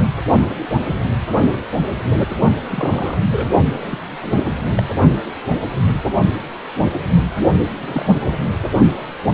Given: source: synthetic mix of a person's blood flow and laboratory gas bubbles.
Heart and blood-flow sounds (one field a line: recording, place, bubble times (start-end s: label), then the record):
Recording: Doppler ultrasound of blood flow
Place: precordium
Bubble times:
2.68-3.18 s: bubbles
3.31-3.49 s: bubbles
3.86-3.99 s: bubbles
4.21-4.36 s: bubbles
4.75-4.83 s: bubbles
7.84-8.05 s: bubbles
8.24-8.34 s: bubbles
From the record:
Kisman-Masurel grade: 222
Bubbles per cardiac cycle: several, 3 to 8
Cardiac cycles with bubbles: 10 to 50%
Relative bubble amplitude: moderate (0.250 to 0.450)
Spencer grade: 2 (many but less than half of the cardiac periods contain bubble signals, singularly or in groups)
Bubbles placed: only in the low amplitude regions of the cardiac cycle